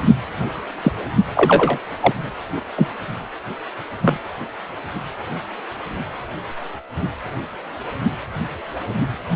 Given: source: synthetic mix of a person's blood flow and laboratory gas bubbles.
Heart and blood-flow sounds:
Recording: Doppler ultrasound of blood flow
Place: precordium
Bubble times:
0.83-0.92 s: bubbles
1.35-1.78 s: bubbles
2.00-2.13 s: bubbles
2.75-2.88 s: bubbles
4.00-4.17 s: bubbles
From the record:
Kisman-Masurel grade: 123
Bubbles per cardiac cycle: 1 to 2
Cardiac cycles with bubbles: 10 to 50%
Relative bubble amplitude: loud (0.450 to 0.775)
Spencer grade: 2 (many but less than half of the cardiac periods contain bubble signals, singularly or in groups)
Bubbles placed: anywhere in the cardiac cycle

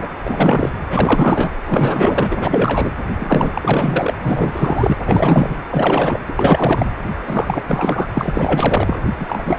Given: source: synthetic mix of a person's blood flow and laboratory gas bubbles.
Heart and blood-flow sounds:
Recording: Doppler ultrasound of blood flow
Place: precordium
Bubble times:
0.00-0.08 s: bubbles
0.23-0.72 s: bubbles
0.90-1.52 s: bubbles
1.67-2.91 s: bubbles
3.18-4.13 s: bubbles
4.23-4.96 s: bubbles
5.04-5.56 s: bubbles
5.68-6.18 s: bubbles
6.28-6.33 s: bubbles
6.35-6.91 s: bubbles
7.26-7.63 s: bubbles
7.67-8.08 s: bubbles
8.15-9.00 s: bubbles
9.18-9.59 s: bubbles
From the record:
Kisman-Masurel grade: 444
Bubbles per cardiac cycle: continuous sound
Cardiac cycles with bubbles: 100%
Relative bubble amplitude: maximal (0.775 to 0.999)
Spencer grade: 4 (maximum detectable bubble signal sounding continuously throughout systole and diastole of every cardiac period, and overriding the amplitude of the normal cardiac signals)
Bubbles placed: anywhere in the cardiac cycle

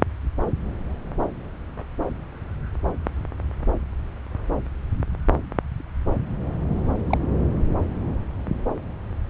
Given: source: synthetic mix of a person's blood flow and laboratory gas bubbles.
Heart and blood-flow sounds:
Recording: Doppler ultrasound of blood flow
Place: subclavian vein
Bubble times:
7.09-7.17 s: bubbles
From the record:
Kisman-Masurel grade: 113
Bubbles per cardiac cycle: 1 to 2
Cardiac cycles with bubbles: 1 to 10%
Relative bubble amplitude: loud (0.450 to 0.775)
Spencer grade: 1 (occasional bubble signal discernible with the cardiac motion signal, with majority of cardiac periods free of bubbles)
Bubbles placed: anywhere in the cardiac cycle

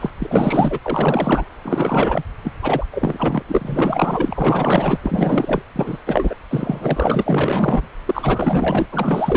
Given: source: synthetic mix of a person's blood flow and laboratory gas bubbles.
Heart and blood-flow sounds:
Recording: Doppler ultrasound of blood flow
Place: subclavian vein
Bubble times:
0.00-0.10 s: bubbles
0.19-0.79 s: bubbles
0.83-1.46 s: bubbles
1.62-2.23 s: bubbles
2.44-2.52 s: bubbles
2.62-2.85 s: bubbles
2.91-3.43 s: bubbles
3.48-4.99 s: bubbles
5.03-5.62 s: bubbles
5.75-5.98 s: bubbles
6.06-6.36 s: bubbles
6.50-7.88 s: bubbles
8.06-8.86 s: bubbles
8.91-9.37 s: bubbles
From the record:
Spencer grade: 4 (maximum detectable bubble signal sounding continuously throughout systole and diastole of every cardiac period, and overriding the amplitude of the normal cardiac signals)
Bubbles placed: anywhere in the cardiac cycle

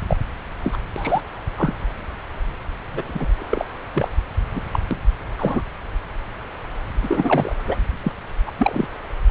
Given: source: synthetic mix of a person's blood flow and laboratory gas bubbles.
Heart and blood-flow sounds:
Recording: Doppler ultrasound of blood flow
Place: subclavian vein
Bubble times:
0.08-0.17 s: bubbles
0.64-0.77 s: bubbles
0.96-1.21 s: bubbles
1.56-1.74 s: bubbles
2.92-3.32 s: bubbles
3.40-3.64 s: bubbles
3.95-4.08 s: bubbles
4.54-4.60 s: bubbles
4.71-4.79 s: bubbles
4.91-4.99 s: bubbles
5.38-5.62 s: bubbles
7.01-7.55 s: bubbles
7.66-7.77 s: bubbles
8.04-8.12 s: bubbles
8.46-8.52 s: bubbles
8.57-8.88 s: bubbles
From the record:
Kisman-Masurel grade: 232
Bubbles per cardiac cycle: several, 3 to 8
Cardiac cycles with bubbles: 50 to 99%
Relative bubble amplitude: moderate (0.250 to 0.450)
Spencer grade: 3 (all of the cardiac periods contain showers or single bubble signals, but not dominating or overriding the cardiac motion signals)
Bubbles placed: anywhere in the cardiac cycle

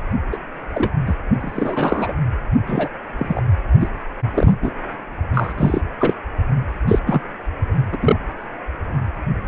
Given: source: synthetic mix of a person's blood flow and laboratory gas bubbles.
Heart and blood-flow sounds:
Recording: Doppler ultrasound of blood flow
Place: precordium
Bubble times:
0.31-0.38 s: bubbles
0.74-0.91 s: bubbles
1.06-1.14 s: bubbles
1.40-2.15 s: bubbles
2.67-2.88 s: bubbles
3.19-3.42 s: bubbles
3.80-3.89 s: bubbles
4.34-4.53 s: bubbles
4.62-4.71 s: bubbles
5.34-5.53 s: bubbles
5.57-5.81 s: bubbles
5.99-6.14 s: bubbles
6.88-6.99 s: bubbles
7.06-7.21 s: bubbles
7.92-7.97 s: bubbles
8.02-8.16 s: bubbles
From the record:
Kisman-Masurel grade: 243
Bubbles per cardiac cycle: several, 3 to 8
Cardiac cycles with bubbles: 100%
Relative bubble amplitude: loud (0.450 to 0.775)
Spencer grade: 3 (all of the cardiac periods contain showers or single bubble signals, but not dominating or overriding the cardiac motion signals)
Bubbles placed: only in the low amplitude regions of the cardiac cycle

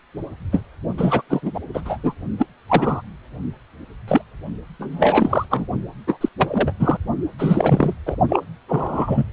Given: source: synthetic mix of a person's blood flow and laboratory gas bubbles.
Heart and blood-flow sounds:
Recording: Doppler ultrasound of blood flow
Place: precordium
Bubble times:
0.52-0.62 s: bubbles
0.97-1.22 s: bubbles
1.29-1.60 s: bubbles
1.74-1.82 s: bubbles
1.85-1.97 s: bubbles
2.03-2.13 s: bubbles
2.38-2.46 s: bubbles
2.68-3.01 s: bubbles
4.08-4.22 s: bubbles
4.79-5.46 s: bubbles
5.50-5.66 s: bubbles
6.07-6.18 s: bubbles
6.21-6.29 s: bubbles
6.38-6.73 s: bubbles
6.79-6.98 s: bubbles
7.38-7.94 s: bubbles
8.06-8.17 s: bubbles
8.29-8.44 s: bubbles
8.68-9.25 s: bubbles
From the record:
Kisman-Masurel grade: 233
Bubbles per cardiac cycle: several, 3 to 8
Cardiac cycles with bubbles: 50 to 99%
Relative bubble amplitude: loud (0.450 to 0.775)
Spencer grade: 3 (all of the cardiac periods contain showers or single bubble signals, but not dominating or overriding the cardiac motion signals)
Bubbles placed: only in the low amplitude regions of the cardiac cycle

